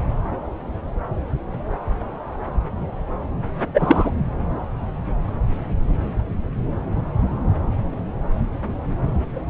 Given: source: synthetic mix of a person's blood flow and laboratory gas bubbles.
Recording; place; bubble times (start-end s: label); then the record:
Doppler ultrasound of blood flow; subclavian vein
3.74-4.11 s: bubbles
From the record:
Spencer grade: 1 (occasional bubble signal discernible with the cardiac motion signal, with majority of cardiac periods free of bubbles); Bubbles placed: anywhere in the cardiac cycle